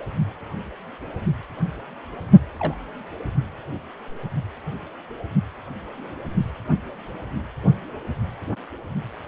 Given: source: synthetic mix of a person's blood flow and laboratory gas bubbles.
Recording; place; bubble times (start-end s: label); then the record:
Doppler ultrasound of blood flow; precordium
2.58-2.74 s: bubbles
From the record:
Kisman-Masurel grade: 111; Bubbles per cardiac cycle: 1 to 2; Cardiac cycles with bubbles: 1 to 10%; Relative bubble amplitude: barely perceptible (0.100 to 0.250); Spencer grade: 1 (occasional bubble signal discernible with the cardiac motion signal, with majority of cardiac periods free of bubbles); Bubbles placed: only in the low amplitude regions of the cardiac cycle